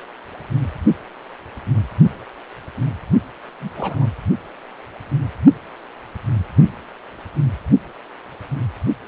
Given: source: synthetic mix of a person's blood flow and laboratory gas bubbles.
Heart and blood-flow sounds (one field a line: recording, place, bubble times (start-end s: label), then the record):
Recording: Doppler ultrasound of blood flow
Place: precordium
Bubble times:
3.61-3.71 s: bubbles
3.75-4.08 s: bubbles
From the record:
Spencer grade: 1 (occasional bubble signal discernible with the cardiac motion signal, with majority of cardiac periods free of bubbles)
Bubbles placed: only in the low amplitude regions of the cardiac cycle